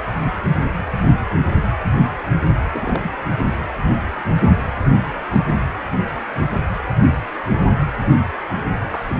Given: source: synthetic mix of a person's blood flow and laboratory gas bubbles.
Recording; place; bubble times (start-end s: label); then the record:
Doppler ultrasound of blood flow; precordium
2.74-3.11 s: bubbles
8.82-9.03 s: bubbles
9.10-9.14 s: bubbles
From the record:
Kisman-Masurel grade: 211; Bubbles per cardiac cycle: several, 3 to 8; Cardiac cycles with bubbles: 1 to 10%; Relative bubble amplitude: barely perceptible (0.100 to 0.250); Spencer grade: 1 (occasional bubble signal discernible with the cardiac motion signal, with majority of cardiac periods free of bubbles); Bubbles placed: anywhere in the cardiac cycle